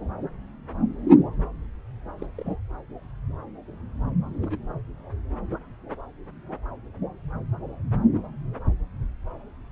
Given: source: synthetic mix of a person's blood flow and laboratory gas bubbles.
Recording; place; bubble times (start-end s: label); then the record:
Doppler ultrasound of blood flow; subclavian vein
2.19-2.26 s: bubbles
2.37-2.56 s: bubbles
4.28-4.58 s: bubbles
From the record:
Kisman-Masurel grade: 121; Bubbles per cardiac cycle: 1 to 2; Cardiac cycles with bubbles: 10 to 50%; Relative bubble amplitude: barely perceptible (0.100 to 0.250); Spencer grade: 2 (many but less than half of the cardiac periods contain bubble signals, singularly or in groups); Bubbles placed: anywhere in the cardiac cycle